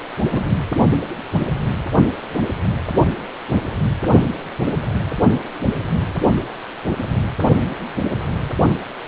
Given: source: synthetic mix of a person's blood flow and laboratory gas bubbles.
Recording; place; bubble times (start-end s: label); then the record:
Doppler ultrasound of blood flow; precordium
0.31-0.49 s: bubbles
From the record:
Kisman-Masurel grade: 112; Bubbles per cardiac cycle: 1 to 2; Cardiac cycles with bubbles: 1 to 10%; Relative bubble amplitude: moderate (0.250 to 0.450); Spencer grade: 1 (occasional bubble signal discernible with the cardiac motion signal, with majority of cardiac periods free of bubbles); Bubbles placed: only in the low amplitude regions of the cardiac cycle